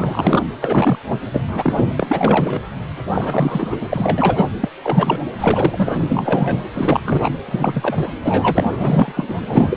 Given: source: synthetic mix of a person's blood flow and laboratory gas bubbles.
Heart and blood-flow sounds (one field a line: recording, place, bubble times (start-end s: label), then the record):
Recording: Doppler ultrasound of blood flow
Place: precordium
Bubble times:
0.00-0.43 s: bubbles
0.61-0.99 s: bubbles
1.08-1.20 s: bubbles
1.34-1.42 s: bubbles
1.48-2.60 s: bubbles
3.12-3.77 s: bubbles
3.81-4.46 s: bubbles
4.61-4.69 s: bubbles
4.83-5.20 s: bubbles
5.38-6.64 s: bubbles
6.74-7.00 s: bubbles
7.04-7.29 s: bubbles
7.46-8.12 s: bubbles
8.24-8.65 s: bubbles
8.76-9.12 s: bubbles
9.16-9.35 s: bubbles
9.46-9.77 s: bubbles
From the record:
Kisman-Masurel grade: 343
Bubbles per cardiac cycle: rolling drumbeat, 9 or more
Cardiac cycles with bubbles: 100%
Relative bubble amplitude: loud (0.450 to 0.775)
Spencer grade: 3 (all of the cardiac periods contain showers or single bubble signals, but not dominating or overriding the cardiac motion signals)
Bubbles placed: anywhere in the cardiac cycle